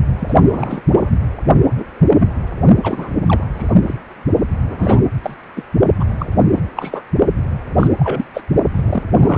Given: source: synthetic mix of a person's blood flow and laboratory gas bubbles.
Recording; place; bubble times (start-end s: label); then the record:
Doppler ultrasound of blood flow; precordium
0.18-0.35 s: bubbles
0.48-0.81 s: bubbles
0.92-1.10 s: bubbles
1.74-1.84 s: bubbles
2.08-2.29 s: bubbles
2.83-3.12 s: bubbles
3.26-3.44 s: bubbles
3.52-3.72 s: bubbles
3.87-3.95 s: bubbles
4.68-4.99 s: bubbles
5.22-5.34 s: bubbles
5.55-5.63 s: bubbles
5.99-6.04 s: bubbles
6.18-6.27 s: bubbles
6.56-6.61 s: bubbles
6.76-7.02 s: bubbles
7.79-7.88 s: bubbles
7.99-8.25 s: bubbles
8.34-8.42 s: bubbles
8.74-9.03 s: bubbles
9.18-9.38 s: bubbles
From the record:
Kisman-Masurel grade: 243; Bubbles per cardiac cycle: several, 3 to 8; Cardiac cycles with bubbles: 100%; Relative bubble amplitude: loud (0.450 to 0.775); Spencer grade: 3 (all of the cardiac periods contain showers or single bubble signals, but not dominating or overriding the cardiac motion signals); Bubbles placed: only in the low amplitude regions of the cardiac cycle